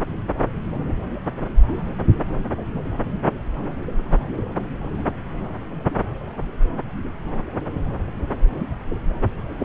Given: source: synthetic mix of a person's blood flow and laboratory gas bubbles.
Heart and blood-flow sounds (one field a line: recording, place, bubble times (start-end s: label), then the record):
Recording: Doppler ultrasound of blood flow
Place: subclavian vein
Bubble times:
9.58-9.65 s: bubbles
From the record:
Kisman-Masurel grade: 112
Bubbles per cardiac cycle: 1 to 2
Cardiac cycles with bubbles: 1 to 10%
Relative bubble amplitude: moderate (0.250 to 0.450)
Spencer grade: 1 (occasional bubble signal discernible with the cardiac motion signal, with majority of cardiac periods free of bubbles)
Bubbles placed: anywhere in the cardiac cycle